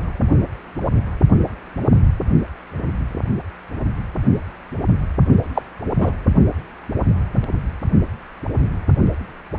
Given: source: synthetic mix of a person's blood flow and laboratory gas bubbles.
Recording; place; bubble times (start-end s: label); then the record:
Doppler ultrasound of blood flow; precordium
5.54-5.62 s: bubbles
5.98-6.12 s: bubbles
From the record:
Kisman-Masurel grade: 113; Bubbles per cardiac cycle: 1 to 2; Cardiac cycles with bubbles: 1 to 10%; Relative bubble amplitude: loud (0.450 to 0.775); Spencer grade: 1 (occasional bubble signal discernible with the cardiac motion signal, with majority of cardiac periods free of bubbles); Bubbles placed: only in the low amplitude regions of the cardiac cycle